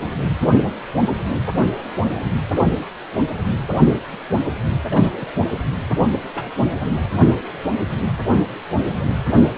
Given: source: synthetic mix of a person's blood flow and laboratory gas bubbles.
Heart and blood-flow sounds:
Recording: Doppler ultrasound of blood flow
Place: precordium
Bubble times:
2.06-2.21 s: bubbles
4.90-5.13 s: bubbles
5.21-5.30 s: bubbles
6.12-6.20 s: bubbles
6.35-6.51 s: bubbles
7.25-7.33 s: bubbles
From the record:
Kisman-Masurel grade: 121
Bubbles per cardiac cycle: 1 to 2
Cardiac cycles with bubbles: 10 to 50%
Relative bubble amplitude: barely perceptible (0.100 to 0.250)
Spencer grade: 2 (many but less than half of the cardiac periods contain bubble signals, singularly or in groups)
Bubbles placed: anywhere in the cardiac cycle

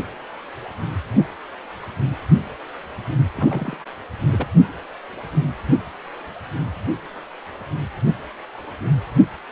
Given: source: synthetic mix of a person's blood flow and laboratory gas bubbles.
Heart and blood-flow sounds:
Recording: Doppler ultrasound of blood flow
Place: precordium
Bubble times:
3.37-3.75 s: bubbles
4.30-4.47 s: bubbles
From the record:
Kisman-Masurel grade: 121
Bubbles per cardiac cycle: 1 to 2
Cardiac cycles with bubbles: 10 to 50%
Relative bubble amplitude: barely perceptible (0.100 to 0.250)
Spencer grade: 2 (many but less than half of the cardiac periods contain bubble signals, singularly or in groups)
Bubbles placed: only in the low amplitude regions of the cardiac cycle

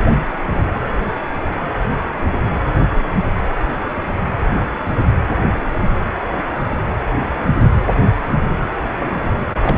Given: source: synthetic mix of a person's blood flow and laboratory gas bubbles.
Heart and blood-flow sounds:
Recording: Doppler ultrasound of blood flow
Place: precordium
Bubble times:
0.13-0.28 s: bubbles
0.54-0.61 s: bubbles
8.97-9.16 s: bubbles
9.61-9.78 s: bubbles
From the record:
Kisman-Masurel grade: 122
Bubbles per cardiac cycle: 1 to 2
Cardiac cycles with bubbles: 10 to 50%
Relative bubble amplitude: moderate (0.250 to 0.450)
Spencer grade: 2 (many but less than half of the cardiac periods contain bubble signals, singularly or in groups)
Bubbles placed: anywhere in the cardiac cycle

